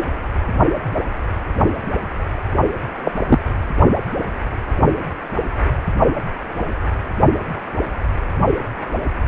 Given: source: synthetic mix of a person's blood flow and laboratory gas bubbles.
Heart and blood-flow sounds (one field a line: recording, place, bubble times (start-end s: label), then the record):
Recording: Doppler ultrasound of blood flow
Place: precordium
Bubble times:
3.04-3.12 s: bubbles
3.29-3.39 s: bubbles
From the record:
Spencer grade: 2 (many but less than half of the cardiac periods contain bubble signals, singularly or in groups)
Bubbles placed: only in the low amplitude regions of the cardiac cycle